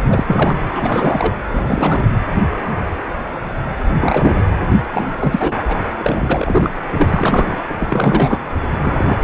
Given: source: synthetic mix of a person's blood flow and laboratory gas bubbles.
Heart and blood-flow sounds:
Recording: Doppler ultrasound of blood flow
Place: precordium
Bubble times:
0.08-0.24 s: bubbles
0.27-0.56 s: bubbles
0.70-1.40 s: bubbles
1.50-2.06 s: bubbles
3.99-4.42 s: bubbles
4.93-5.13 s: bubbles
5.19-5.79 s: bubbles
5.97-6.72 s: bubbles
6.90-7.63 s: bubbles
7.70-7.75 s: bubbles
7.80-8.40 s: bubbles
8.80-9.20 s: bubbles
From the record:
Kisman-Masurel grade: 333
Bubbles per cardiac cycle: rolling drumbeat, 9 or more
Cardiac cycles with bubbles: 50 to 99%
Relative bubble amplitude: loud (0.450 to 0.775)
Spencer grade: 3 (all of the cardiac periods contain showers or single bubble signals, but not dominating or overriding the cardiac motion signals)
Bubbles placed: anywhere in the cardiac cycle

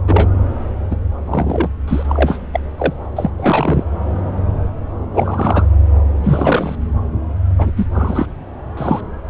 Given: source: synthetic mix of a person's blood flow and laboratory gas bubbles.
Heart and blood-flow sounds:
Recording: Doppler ultrasound of blood flow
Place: subclavian vein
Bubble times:
0.07-0.29 s: bubbles
0.91-0.96 s: bubbles
1.26-1.69 s: bubbles
1.88-2.39 s: bubbles
2.52-2.60 s: bubbles
2.78-2.94 s: bubbles
3.16-3.30 s: bubbles
3.38-3.87 s: bubbles
5.14-5.68 s: bubbles
6.23-6.75 s: bubbles
7.58-7.71 s: bubbles
7.76-7.87 s: bubbles
7.94-8.27 s: bubbles
8.77-9.01 s: bubbles
From the record:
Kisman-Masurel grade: 233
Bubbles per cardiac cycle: several, 3 to 8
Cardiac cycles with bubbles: 50 to 99%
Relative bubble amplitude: loud (0.450 to 0.775)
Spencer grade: 3 (all of the cardiac periods contain showers or single bubble signals, but not dominating or overriding the cardiac motion signals)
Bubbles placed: anywhere in the cardiac cycle

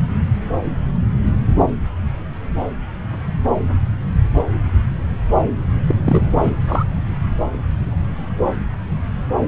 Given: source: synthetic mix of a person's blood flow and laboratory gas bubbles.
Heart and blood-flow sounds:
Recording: Doppler ultrasound of blood flow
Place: subclavian vein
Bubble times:
5.88-6.31 s: bubbles
6.41-6.55 s: bubbles
6.67-6.84 s: bubbles
From the record:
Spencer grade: 2 (many but less than half of the cardiac periods contain bubble signals, singularly or in groups)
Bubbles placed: anywhere in the cardiac cycle

